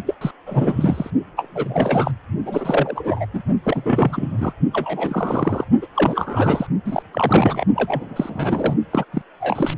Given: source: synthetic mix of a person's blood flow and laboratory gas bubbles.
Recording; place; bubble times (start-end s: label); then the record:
Doppler ultrasound of blood flow; precordium
0.06-0.15 s: bubbles
0.21-0.31 s: bubbles
0.46-1.10 s: bubbles
1.36-2.11 s: bubbles
2.45-3.25 s: bubbles
3.33-3.42 s: bubbles
3.63-4.53 s: bubbles
4.73-5.65 s: bubbles
5.82-5.87 s: bubbles
5.95-6.67 s: bubbles
6.85-7.03 s: bubbles
7.12-7.65 s: bubbles
7.75-8.76 s: bubbles
8.91-9.04 s: bubbles
9.12-9.21 s: bubbles
9.40-9.74 s: bubbles
From the record:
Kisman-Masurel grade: 343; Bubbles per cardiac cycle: rolling drumbeat, 9 or more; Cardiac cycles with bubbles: 100%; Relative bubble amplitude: loud (0.450 to 0.775); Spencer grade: 3 (all of the cardiac periods contain showers or single bubble signals, but not dominating or overriding the cardiac motion signals); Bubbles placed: only in the low amplitude regions of the cardiac cycle